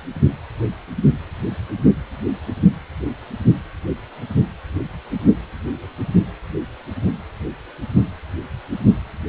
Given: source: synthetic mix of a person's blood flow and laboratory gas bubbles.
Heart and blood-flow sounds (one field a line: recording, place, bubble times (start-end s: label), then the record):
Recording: Doppler ultrasound of blood flow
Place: precordium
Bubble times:
no bubbles
From the record:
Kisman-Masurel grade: 000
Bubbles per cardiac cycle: 0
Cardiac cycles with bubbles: 0%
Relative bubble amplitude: no bubbles discernible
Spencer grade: 0 (complete lack of bubble signals)